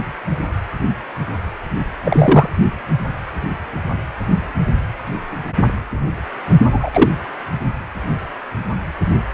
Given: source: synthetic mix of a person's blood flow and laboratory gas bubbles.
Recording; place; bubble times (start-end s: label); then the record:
Doppler ultrasound of blood flow; precordium
2.05-2.49 s: bubbles
6.70-7.10 s: bubbles
From the record:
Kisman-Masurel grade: 223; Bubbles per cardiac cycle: several, 3 to 8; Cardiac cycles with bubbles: 10 to 50%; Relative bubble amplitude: loud (0.450 to 0.775); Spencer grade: 2 (many but less than half of the cardiac periods contain bubble signals, singularly or in groups); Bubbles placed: anywhere in the cardiac cycle